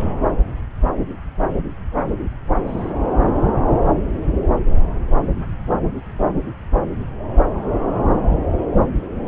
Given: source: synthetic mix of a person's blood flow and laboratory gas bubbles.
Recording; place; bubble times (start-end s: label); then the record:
Doppler ultrasound of blood flow; subclavian vein
2.67-2.90 s: bubbles
4.06-4.12 s: bubbles
4.18-4.34 s: bubbles
From the record:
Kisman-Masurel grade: 121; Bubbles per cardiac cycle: 1 to 2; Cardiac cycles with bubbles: 10 to 50%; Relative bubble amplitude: barely perceptible (0.100 to 0.250); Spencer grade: 2 (many but less than half of the cardiac periods contain bubble signals, singularly or in groups); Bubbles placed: anywhere in the cardiac cycle